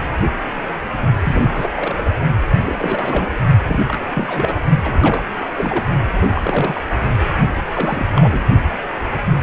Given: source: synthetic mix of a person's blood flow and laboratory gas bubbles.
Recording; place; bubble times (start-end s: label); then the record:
Doppler ultrasound of blood flow; precordium
1.24-1.51 s: bubbles
1.55-1.69 s: bubbles
1.75-2.10 s: bubbles
2.62-3.33 s: bubbles
3.66-3.80 s: bubbles
3.88-4.04 s: bubbles
4.14-4.57 s: bubbles
4.83-5.29 s: bubbles
5.46-5.84 s: bubbles
6.22-6.85 s: bubbles
7.67-8.39 s: bubbles
From the record:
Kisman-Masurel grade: 332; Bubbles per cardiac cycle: rolling drumbeat, 9 or more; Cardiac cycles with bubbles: 50 to 99%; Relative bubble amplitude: moderate (0.250 to 0.450); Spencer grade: 3 (all of the cardiac periods contain showers or single bubble signals, but not dominating or overriding the cardiac motion signals); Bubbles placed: only in the low amplitude regions of the cardiac cycle